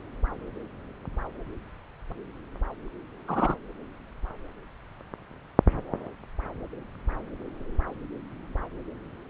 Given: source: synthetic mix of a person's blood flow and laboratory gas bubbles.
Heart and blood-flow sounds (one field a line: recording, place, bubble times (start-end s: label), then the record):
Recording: Doppler ultrasound of blood flow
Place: subclavian vein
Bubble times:
3.27-3.55 s: bubbles
From the record:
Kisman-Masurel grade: 122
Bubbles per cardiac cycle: 1 to 2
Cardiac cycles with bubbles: 10 to 50%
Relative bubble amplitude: moderate (0.250 to 0.450)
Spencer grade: 2 (many but less than half of the cardiac periods contain bubble signals, singularly or in groups)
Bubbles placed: anywhere in the cardiac cycle